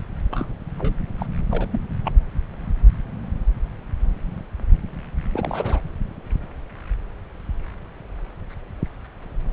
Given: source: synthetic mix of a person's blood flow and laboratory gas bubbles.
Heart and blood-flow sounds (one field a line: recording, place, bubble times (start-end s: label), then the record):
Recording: Doppler ultrasound of blood flow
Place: subclavian vein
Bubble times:
0.32-0.48 s: bubbles
0.78-0.95 s: bubbles
1.18-1.26 s: bubbles
1.51-1.67 s: bubbles
1.72-1.81 s: bubbles
2.05-2.10 s: bubbles
5.33-5.80 s: bubbles
From the record:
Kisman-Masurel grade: 221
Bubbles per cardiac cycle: several, 3 to 8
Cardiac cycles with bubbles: 10 to 50%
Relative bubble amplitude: barely perceptible (0.100 to 0.250)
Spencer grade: 2 (many but less than half of the cardiac periods contain bubble signals, singularly or in groups)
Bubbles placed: anywhere in the cardiac cycle